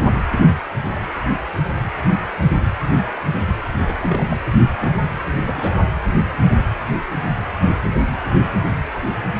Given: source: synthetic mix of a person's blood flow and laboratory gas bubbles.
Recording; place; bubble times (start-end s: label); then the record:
Doppler ultrasound of blood flow; precordium
3.84-3.95 s: bubbles
3.98-4.25 s: bubbles
4.29-4.37 s: bubbles
4.46-4.50 s: bubbles
4.80-4.92 s: bubbles
5.39-5.91 s: bubbles
From the record:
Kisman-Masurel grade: 221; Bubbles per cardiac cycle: several, 3 to 8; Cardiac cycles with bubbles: 10 to 50%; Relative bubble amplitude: barely perceptible (0.100 to 0.250); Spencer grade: 2 (many but less than half of the cardiac periods contain bubble signals, singularly or in groups); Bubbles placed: anywhere in the cardiac cycle